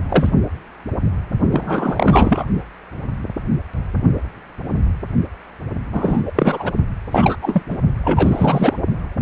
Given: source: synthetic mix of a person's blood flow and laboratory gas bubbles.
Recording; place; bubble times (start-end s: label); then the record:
Doppler ultrasound of blood flow; precordium
0.09-0.31 s: bubbles
1.51-2.46 s: bubbles
5.92-6.32 s: bubbles
6.35-6.71 s: bubbles
7.11-7.36 s: bubbles
7.42-7.62 s: bubbles
7.70-7.77 s: bubbles
8.04-8.74 s: bubbles
From the record:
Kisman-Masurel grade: 333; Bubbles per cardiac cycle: rolling drumbeat, 9 or more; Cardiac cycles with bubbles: 50 to 99%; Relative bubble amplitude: loud (0.450 to 0.775); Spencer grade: 3 (all of the cardiac periods contain showers or single bubble signals, but not dominating or overriding the cardiac motion signals); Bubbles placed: only in the low amplitude regions of the cardiac cycle